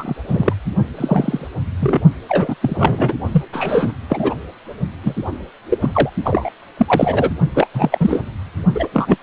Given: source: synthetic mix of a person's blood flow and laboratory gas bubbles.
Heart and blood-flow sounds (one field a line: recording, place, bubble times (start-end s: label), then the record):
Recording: Doppler ultrasound of blood flow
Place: precordium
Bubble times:
0.00-0.15 s: bubbles
0.27-0.53 s: bubbles
0.97-1.47 s: bubbles
1.80-1.99 s: bubbles
2.29-2.55 s: bubbles
2.62-3.14 s: bubbles
3.31-3.43 s: bubbles
3.53-3.92 s: bubbles
4.09-4.36 s: bubbles
5.03-5.15 s: bubbles
5.70-5.78 s: bubbles
5.81-6.09 s: bubbles
6.24-6.50 s: bubbles
6.77-7.31 s: bubbles
7.54-7.67 s: bubbles
7.73-8.23 s: bubbles
8.74-8.88 s: bubbles
8.93-9.18 s: bubbles
From the record:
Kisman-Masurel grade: 243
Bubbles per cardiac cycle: several, 3 to 8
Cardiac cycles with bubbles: 100%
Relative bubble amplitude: loud (0.450 to 0.775)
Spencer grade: 3 (all of the cardiac periods contain showers or single bubble signals, but not dominating or overriding the cardiac motion signals)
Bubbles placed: only in the low amplitude regions of the cardiac cycle